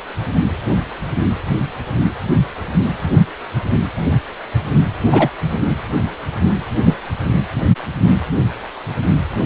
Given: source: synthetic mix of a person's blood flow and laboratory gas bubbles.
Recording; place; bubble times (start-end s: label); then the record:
Doppler ultrasound of blood flow; precordium
5.10-5.29 s: bubbles
6.84-6.94 s: bubbles
From the record:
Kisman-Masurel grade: 123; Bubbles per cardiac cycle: 1 to 2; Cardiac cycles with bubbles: 10 to 50%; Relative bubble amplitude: loud (0.450 to 0.775); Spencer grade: 2 (many but less than half of the cardiac periods contain bubble signals, singularly or in groups); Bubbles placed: anywhere in the cardiac cycle